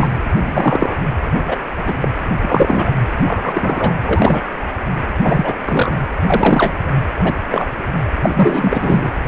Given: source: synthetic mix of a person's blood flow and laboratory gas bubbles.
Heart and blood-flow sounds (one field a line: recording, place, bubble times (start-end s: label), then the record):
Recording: Doppler ultrasound of blood flow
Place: precordium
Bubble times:
0.00-0.14 s: bubbles
0.29-0.96 s: bubbles
1.44-1.57 s: bubbles
1.86-1.96 s: bubbles
2.02-2.10 s: bubbles
2.41-2.92 s: bubbles
3.27-3.95 s: bubbles
4.03-4.42 s: bubbles
4.46-4.64 s: bubbles
5.21-5.53 s: bubbles
5.66-6.00 s: bubbles
6.16-6.18 s: bubbles
6.21-6.74 s: bubbles
7.24-7.34 s: bubbles
7.51-7.66 s: bubbles
8.21-9.08 s: bubbles
9.24-9.28 s: bubbles
From the record:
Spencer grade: 3 (all of the cardiac periods contain showers or single bubble signals, but not dominating or overriding the cardiac motion signals)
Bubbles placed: anywhere in the cardiac cycle